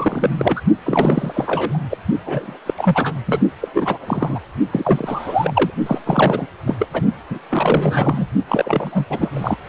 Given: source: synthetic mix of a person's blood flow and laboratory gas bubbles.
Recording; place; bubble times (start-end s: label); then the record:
Doppler ultrasound of blood flow; precordium
0.00-0.61 s: bubbles
0.84-1.83 s: bubbles
1.91-1.98 s: bubbles
2.25-2.58 s: bubbles
2.66-2.74 s: bubbles
2.77-3.13 s: bubbles
3.26-3.41 s: bubbles
3.60-3.69 s: bubbles
3.74-3.98 s: bubbles
4.01-4.40 s: bubbles
4.71-5.71 s: bubbles
5.86-5.99 s: bubbles
6.05-6.46 s: bubbles
6.67-6.75 s: bubbles
6.79-6.87 s: bubbles
6.93-7.01 s: bubbles
7.30-7.38 s: bubbles
7.50-8.26 s: bubbles
8.49-9.05 s: bubbles
9.09-9.29 s: bubbles
9.34-9.56 s: bubbles
From the record:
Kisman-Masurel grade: 342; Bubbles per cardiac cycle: rolling drumbeat, 9 or more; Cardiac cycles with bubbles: 100%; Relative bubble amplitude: moderate (0.250 to 0.450); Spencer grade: 3 (all of the cardiac periods contain showers or single bubble signals, but not dominating or overriding the cardiac motion signals); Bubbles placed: only in the low amplitude regions of the cardiac cycle